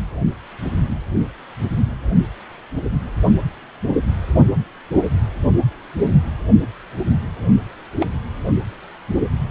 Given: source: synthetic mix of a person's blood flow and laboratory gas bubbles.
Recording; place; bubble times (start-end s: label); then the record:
Doppler ultrasound of blood flow; precordium
7.99-8.08 s: bubbles
From the record:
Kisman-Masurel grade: 112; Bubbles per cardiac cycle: 1 to 2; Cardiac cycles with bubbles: 1 to 10%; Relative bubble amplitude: moderate (0.250 to 0.450); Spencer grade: 1 (occasional bubble signal discernible with the cardiac motion signal, with majority of cardiac periods free of bubbles); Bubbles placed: anywhere in the cardiac cycle